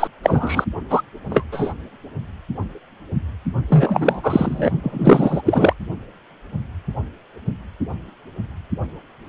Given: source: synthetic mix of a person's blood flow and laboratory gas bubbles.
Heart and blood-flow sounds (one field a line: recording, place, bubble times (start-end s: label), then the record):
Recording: Doppler ultrasound of blood flow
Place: precordium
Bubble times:
0.00-0.08 s: bubbles
0.23-0.65 s: bubbles
0.90-1.02 s: bubbles
1.30-1.44 s: bubbles
1.52-1.73 s: bubbles
3.68-4.71 s: bubbles
4.83-5.42 s: bubbles
5.46-5.73 s: bubbles
From the record:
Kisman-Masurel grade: 233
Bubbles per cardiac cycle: several, 3 to 8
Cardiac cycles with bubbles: 50 to 99%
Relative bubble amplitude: loud (0.450 to 0.775)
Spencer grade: 3 (all of the cardiac periods contain showers or single bubble signals, but not dominating or overriding the cardiac motion signals)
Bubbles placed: only in the low amplitude regions of the cardiac cycle